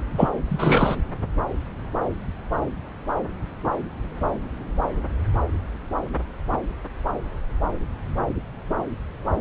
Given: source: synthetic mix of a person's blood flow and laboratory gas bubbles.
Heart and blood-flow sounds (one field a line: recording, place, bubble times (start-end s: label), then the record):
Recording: Doppler ultrasound of blood flow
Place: subclavian vein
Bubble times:
0.17-0.29 s: bubbles
0.49-0.96 s: bubbles
From the record:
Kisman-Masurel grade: 223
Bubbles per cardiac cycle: several, 3 to 8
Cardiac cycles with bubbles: 10 to 50%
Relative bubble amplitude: loud (0.450 to 0.775)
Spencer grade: 2 (many but less than half of the cardiac periods contain bubble signals, singularly or in groups)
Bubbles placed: anywhere in the cardiac cycle